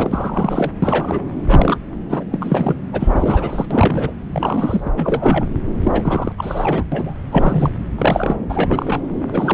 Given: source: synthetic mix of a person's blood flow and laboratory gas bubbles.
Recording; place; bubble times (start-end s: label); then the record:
Doppler ultrasound of blood flow; subclavian vein
0.00-0.71 s: bubbles
0.82-1.24 s: bubbles
1.46-1.78 s: bubbles
2.10-2.24 s: bubbles
2.31-2.77 s: bubbles
2.93-3.66 s: bubbles
3.71-4.13 s: bubbles
4.31-4.90 s: bubbles
4.96-5.48 s: bubbles
5.83-6.32 s: bubbles
6.38-7.14 s: bubbles
7.32-7.77 s: bubbles
7.97-8.37 s: bubbles
8.49-9.00 s: bubbles
9.31-9.54 s: bubbles
From the record:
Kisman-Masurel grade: 342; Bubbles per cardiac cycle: rolling drumbeat, 9 or more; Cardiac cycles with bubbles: 100%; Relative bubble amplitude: moderate (0.250 to 0.450); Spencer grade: 3 (all of the cardiac periods contain showers or single bubble signals, but not dominating or overriding the cardiac motion signals); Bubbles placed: anywhere in the cardiac cycle